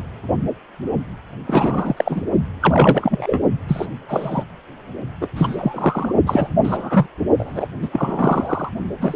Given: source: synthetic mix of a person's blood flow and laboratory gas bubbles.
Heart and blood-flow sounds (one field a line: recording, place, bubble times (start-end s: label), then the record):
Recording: Doppler ultrasound of blood flow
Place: precordium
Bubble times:
1.47-2.23 s: bubbles
2.61-3.39 s: bubbles
3.67-3.87 s: bubbles
4.08-4.44 s: bubbles
5.21-5.29 s: bubbles
5.36-6.15 s: bubbles
6.26-6.48 s: bubbles
6.63-7.07 s: bubbles
7.38-7.66 s: bubbles
7.82-7.89 s: bubbles
7.92-8.69 s: bubbles
9.01-9.16 s: bubbles
From the record:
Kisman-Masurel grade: 243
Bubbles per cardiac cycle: several, 3 to 8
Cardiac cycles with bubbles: 100%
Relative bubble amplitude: loud (0.450 to 0.775)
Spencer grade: 3 (all of the cardiac periods contain showers or single bubble signals, but not dominating or overriding the cardiac motion signals)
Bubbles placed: only in the low amplitude regions of the cardiac cycle